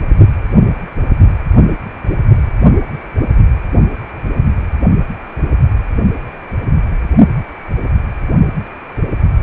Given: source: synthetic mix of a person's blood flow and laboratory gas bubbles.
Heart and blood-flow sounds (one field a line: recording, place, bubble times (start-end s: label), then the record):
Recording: Doppler ultrasound of blood flow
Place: precordium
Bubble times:
no bubbles
From the record:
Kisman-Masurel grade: 000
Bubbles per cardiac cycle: 0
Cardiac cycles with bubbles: 0%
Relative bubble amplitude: no bubbles discernible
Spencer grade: 0 (complete lack of bubble signals)